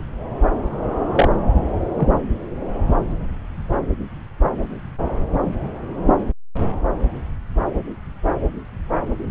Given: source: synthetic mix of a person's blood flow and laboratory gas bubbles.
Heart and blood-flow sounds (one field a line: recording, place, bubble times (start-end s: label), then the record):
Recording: Doppler ultrasound of blood flow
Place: subclavian vein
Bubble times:
1.15-1.29 s: bubbles
1.94-2.12 s: bubbles
From the record:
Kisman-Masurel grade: 122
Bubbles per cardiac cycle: 1 to 2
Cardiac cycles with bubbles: 10 to 50%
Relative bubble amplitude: moderate (0.250 to 0.450)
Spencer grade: 2 (many but less than half of the cardiac periods contain bubble signals, singularly or in groups)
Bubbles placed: anywhere in the cardiac cycle